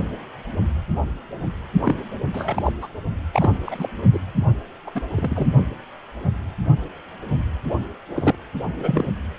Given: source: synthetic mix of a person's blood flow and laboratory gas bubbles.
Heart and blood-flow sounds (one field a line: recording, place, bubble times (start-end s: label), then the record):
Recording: Doppler ultrasound of blood flow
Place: precordium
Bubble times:
1.83-1.96 s: bubbles
2.33-2.73 s: bubbles
2.80-2.88 s: bubbles
3.32-3.52 s: bubbles
3.65-3.88 s: bubbles
4.13-4.19 s: bubbles
4.87-4.91 s: bubbles
4.95-5.00 s: bubbles
5.14-5.47 s: bubbles
8.14-8.35 s: bubbles
8.76-9.05 s: bubbles
From the record:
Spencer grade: 3 (all of the cardiac periods contain showers or single bubble signals, but not dominating or overriding the cardiac motion signals)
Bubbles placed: only in the low amplitude regions of the cardiac cycle